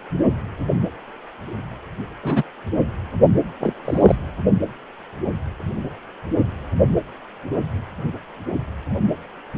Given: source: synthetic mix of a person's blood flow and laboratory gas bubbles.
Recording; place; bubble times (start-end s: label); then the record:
Doppler ultrasound of blood flow; precordium
2.23-2.43 s: bubbles
3.60-3.74 s: bubbles
3.85-4.16 s: bubbles
From the record:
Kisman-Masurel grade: 122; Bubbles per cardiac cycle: 1 to 2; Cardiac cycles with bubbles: 10 to 50%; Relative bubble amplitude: moderate (0.250 to 0.450); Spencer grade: 2 (many but less than half of the cardiac periods contain bubble signals, singularly or in groups); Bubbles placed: anywhere in the cardiac cycle